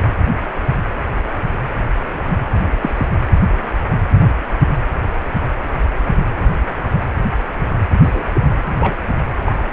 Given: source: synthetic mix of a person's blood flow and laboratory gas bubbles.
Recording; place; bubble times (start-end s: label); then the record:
Doppler ultrasound of blood flow; precordium
2.81-3.06 s: bubbles
8.04-8.23 s: bubbles
8.33-8.41 s: bubbles
8.79-8.95 s: bubbles
9.45-9.68 s: bubbles
From the record:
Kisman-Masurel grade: 122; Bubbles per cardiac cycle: 1 to 2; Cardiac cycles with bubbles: 10 to 50%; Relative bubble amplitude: moderate (0.250 to 0.450); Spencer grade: 2 (many but less than half of the cardiac periods contain bubble signals, singularly or in groups); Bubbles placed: anywhere in the cardiac cycle